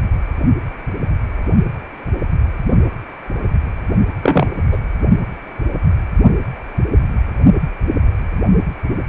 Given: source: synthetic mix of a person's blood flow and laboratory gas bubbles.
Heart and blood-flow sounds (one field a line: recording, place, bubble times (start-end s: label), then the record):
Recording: Doppler ultrasound of blood flow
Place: precordium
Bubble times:
4.23-4.52 s: bubbles
4.71-4.78 s: bubbles
From the record:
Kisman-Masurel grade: 223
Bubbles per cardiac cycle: several, 3 to 8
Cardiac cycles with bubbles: 10 to 50%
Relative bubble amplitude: loud (0.450 to 0.775)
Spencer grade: 2 (many but less than half of the cardiac periods contain bubble signals, singularly or in groups)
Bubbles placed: only in the low amplitude regions of the cardiac cycle